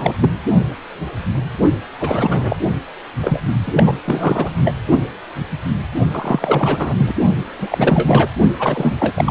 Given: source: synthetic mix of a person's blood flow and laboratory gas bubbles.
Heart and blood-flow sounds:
Doppler ultrasound of blood flow; precordium
0.00-0.14 s: bubbles
0.21-0.30 s: bubbles
2.00-2.56 s: bubbles
3.22-3.40 s: bubbles
3.67-3.73 s: bubbles
3.76-3.94 s: bubbles
4.04-4.52 s: bubbles
4.64-4.75 s: bubbles
6.11-6.94 s: bubbles
6.97-7.12 s: bubbles
7.58-8.29 s: bubbles
8.59-8.96 s: bubbles
8.99-9.31 s: bubbles
From the record:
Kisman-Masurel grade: 333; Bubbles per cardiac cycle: rolling drumbeat, 9 or more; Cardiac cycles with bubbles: 50 to 99%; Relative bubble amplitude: loud (0.450 to 0.775); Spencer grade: 3 (all of the cardiac periods contain showers or single bubble signals, but not dominating or overriding the cardiac motion signals); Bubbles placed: only in the low amplitude regions of the cardiac cycle

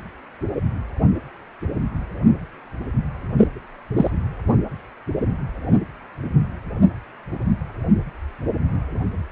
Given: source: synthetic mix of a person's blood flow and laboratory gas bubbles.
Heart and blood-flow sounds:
Doppler ultrasound of blood flow; precordium
3.38-3.47 s: bubbles
3.96-4.10 s: bubbles
From the record:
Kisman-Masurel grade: 113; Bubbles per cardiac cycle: 1 to 2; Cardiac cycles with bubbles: 1 to 10%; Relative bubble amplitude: loud (0.450 to 0.775); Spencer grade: 1 (occasional bubble signal discernible with the cardiac motion signal, with majority of cardiac periods free of bubbles); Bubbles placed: anywhere in the cardiac cycle

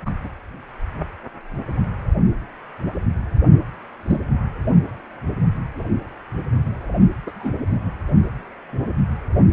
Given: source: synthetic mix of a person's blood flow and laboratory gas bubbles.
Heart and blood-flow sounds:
Doppler ultrasound of blood flow; precordium
0.05-0.10 s: bubbles
0.23-0.29 s: bubbles
4.08-4.21 s: bubbles
7.26-7.32 s: bubbles
7.35-7.52 s: bubbles
From the record:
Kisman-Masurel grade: 122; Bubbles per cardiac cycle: 1 to 2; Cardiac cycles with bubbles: 10 to 50%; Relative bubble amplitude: moderate (0.250 to 0.450); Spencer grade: 2 (many but less than half of the cardiac periods contain bubble signals, singularly or in groups); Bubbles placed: anywhere in the cardiac cycle

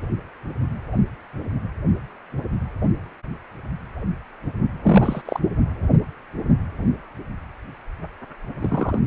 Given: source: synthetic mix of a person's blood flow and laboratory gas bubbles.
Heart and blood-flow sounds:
Doppler ultrasound of blood flow; precordium
4.83-5.21 s: bubbles
5.25-5.40 s: bubbles
8.59-8.99 s: bubbles
From the record:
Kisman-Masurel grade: 223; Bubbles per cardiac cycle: several, 3 to 8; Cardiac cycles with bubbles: 10 to 50%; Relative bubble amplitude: loud (0.450 to 0.775); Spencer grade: 2 (many but less than half of the cardiac periods contain bubble signals, singularly or in groups); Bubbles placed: anywhere in the cardiac cycle

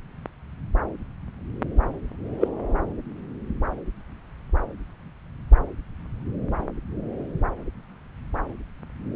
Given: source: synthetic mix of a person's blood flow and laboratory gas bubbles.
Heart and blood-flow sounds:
Doppler ultrasound of blood flow; subclavian vein
2.39-2.48 s: bubbles
From the record:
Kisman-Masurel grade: 113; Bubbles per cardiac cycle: 1 to 2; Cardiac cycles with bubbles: 1 to 10%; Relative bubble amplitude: loud (0.450 to 0.775); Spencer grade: 1 (occasional bubble signal discernible with the cardiac motion signal, with majority of cardiac periods free of bubbles); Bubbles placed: anywhere in the cardiac cycle

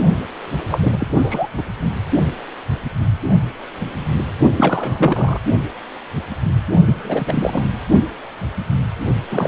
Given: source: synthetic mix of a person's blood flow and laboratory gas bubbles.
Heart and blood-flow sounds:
Doppler ultrasound of blood flow; precordium
0.71-0.78 s: bubbles
0.81-1.07 s: bubbles
1.16-1.48 s: bubbles
1.56-1.62 s: bubbles
4.57-5.40 s: bubbles
6.85-7.64 s: bubbles
9.30-9.48 s: bubbles
From the record:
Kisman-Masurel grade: 332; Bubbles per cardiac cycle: rolling drumbeat, 9 or more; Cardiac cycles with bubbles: 50 to 99%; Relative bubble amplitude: moderate (0.250 to 0.450); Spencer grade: 3 (all of the cardiac periods contain showers or single bubble signals, but not dominating or overriding the cardiac motion signals); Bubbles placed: only in the low amplitude regions of the cardiac cycle

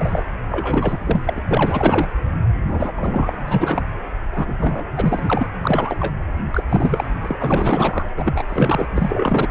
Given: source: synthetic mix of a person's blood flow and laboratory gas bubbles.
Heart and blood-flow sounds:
Doppler ultrasound of blood flow; precordium
0.00-0.22 s: bubbles
0.49-1.39 s: bubbles
1.48-2.08 s: bubbles
2.68-2.92 s: bubbles
2.95-3.36 s: bubbles
3.47-3.82 s: bubbles
4.33-4.85 s: bubbles
4.96-5.46 s: bubbles
5.62-5.96 s: bubbles
6.00-6.14 s: bubbles
6.50-6.64 s: bubbles
6.69-7.09 s: bubbles
7.21-8.09 s: bubbles
8.17-8.44 s: bubbles
8.49-8.87 s: bubbles
8.96-9.48 s: bubbles
From the record:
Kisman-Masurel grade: 343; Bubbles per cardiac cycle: rolling drumbeat, 9 or more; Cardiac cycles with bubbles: 100%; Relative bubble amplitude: loud (0.450 to 0.775); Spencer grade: 3 (all of the cardiac periods contain showers or single bubble signals, but not dominating or overriding the cardiac motion signals); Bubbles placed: anywhere in the cardiac cycle

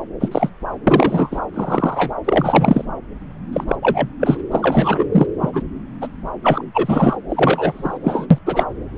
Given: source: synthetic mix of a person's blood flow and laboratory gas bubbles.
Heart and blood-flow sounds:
Doppler ultrasound of blood flow; subclavian vein
0.20-0.50 s: bubbles
0.87-1.41 s: bubbles
1.54-2.13 s: bubbles
2.25-2.85 s: bubbles
3.53-3.64 s: bubbles
3.67-3.75 s: bubbles
3.82-4.08 s: bubbles
4.20-4.37 s: bubbles
4.52-5.27 s: bubbles
5.41-5.62 s: bubbles
6.01-6.08 s: bubbles
6.43-6.66 s: bubbles
6.74-7.17 s: bubbles
7.29-7.98 s: bubbles
8.03-8.26 s: bubbles
8.30-8.38 s: bubbles
8.46-8.64 s: bubbles
From the record:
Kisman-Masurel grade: 243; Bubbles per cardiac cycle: several, 3 to 8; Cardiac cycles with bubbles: 100%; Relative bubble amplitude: loud (0.450 to 0.775); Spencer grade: 3 (all of the cardiac periods contain showers or single bubble signals, but not dominating or overriding the cardiac motion signals); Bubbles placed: anywhere in the cardiac cycle

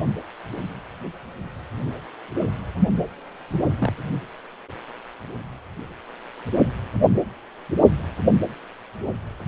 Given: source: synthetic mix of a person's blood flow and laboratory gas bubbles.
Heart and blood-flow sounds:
Doppler ultrasound of blood flow; precordium
3.48-3.67 s: bubbles
3.79-3.92 s: bubbles
From the record:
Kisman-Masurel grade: 121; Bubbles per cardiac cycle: 1 to 2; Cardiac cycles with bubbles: 10 to 50%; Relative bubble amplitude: barely perceptible (0.100 to 0.250); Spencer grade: 2 (many but less than half of the cardiac periods contain bubble signals, singularly or in groups); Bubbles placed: only in the low amplitude regions of the cardiac cycle

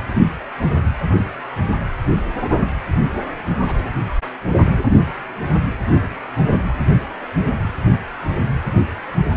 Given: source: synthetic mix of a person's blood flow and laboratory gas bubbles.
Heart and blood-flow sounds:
Doppler ultrasound of blood flow; precordium
3.67-3.90 s: bubbles
6.59-6.73 s: bubbles
7.22-7.25 s: bubbles
7.62-7.74 s: bubbles
From the record:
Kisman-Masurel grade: 121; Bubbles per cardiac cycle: 1 to 2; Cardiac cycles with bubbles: 10 to 50%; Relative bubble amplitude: barely perceptible (0.100 to 0.250); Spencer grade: 2 (many but less than half of the cardiac periods contain bubble signals, singularly or in groups); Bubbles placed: anywhere in the cardiac cycle

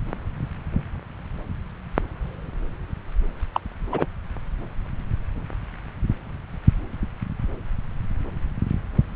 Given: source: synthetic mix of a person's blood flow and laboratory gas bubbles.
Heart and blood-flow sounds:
Doppler ultrasound of blood flow; subclavian vein
3.54-3.60 s: bubbles
3.92-4.05 s: bubbles
From the record:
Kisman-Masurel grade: 122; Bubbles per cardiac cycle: 1 to 2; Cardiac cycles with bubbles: 10 to 50%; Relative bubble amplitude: moderate (0.250 to 0.450); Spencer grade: 2 (many but less than half of the cardiac periods contain bubble signals, singularly or in groups); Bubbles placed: anywhere in the cardiac cycle

